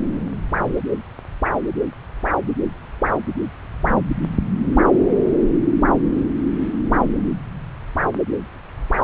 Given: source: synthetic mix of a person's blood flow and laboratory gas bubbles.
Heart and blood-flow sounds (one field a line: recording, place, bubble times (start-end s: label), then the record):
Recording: Doppler ultrasound of blood flow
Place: subclavian vein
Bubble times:
no bubbles
From the record:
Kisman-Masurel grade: 000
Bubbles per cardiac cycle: 0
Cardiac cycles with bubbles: 0%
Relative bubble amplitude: no bubbles discernible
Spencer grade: 0 (complete lack of bubble signals)